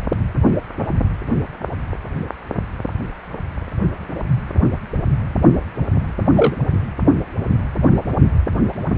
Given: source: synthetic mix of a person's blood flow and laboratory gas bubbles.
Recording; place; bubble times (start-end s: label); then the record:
Doppler ultrasound of blood flow; precordium
6.37-6.56 s: bubbles
From the record:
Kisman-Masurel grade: 113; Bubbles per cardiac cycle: 1 to 2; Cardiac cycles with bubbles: 1 to 10%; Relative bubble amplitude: loud (0.450 to 0.775); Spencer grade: 1 (occasional bubble signal discernible with the cardiac motion signal, with majority of cardiac periods free of bubbles); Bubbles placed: only in the low amplitude regions of the cardiac cycle